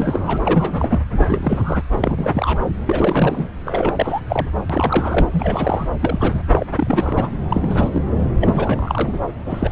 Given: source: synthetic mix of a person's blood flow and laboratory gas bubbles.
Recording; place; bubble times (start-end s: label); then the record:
Doppler ultrasound of blood flow; subclavian vein
0.00-0.38 s: bubbles
0.44-0.99 s: bubbles
1.17-1.81 s: bubbles
1.91-2.62 s: bubbles
2.85-3.49 s: bubbles
3.65-4.20 s: bubbles
4.28-4.49 s: bubbles
4.70-5.29 s: bubbles
5.32-5.88 s: bubbles
5.99-6.45 s: bubbles
6.49-6.64 s: bubbles
6.77-7.29 s: bubbles
7.50-8.02 s: bubbles
8.10-8.15 s: bubbles
8.41-9.21 s: bubbles
9.45-9.72 s: bubbles
From the record:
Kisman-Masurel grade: 343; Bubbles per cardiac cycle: rolling drumbeat, 9 or more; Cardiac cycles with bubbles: 100%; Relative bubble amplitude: loud (0.450 to 0.775); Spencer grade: 3 (all of the cardiac periods contain showers or single bubble signals, but not dominating or overriding the cardiac motion signals); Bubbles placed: anywhere in the cardiac cycle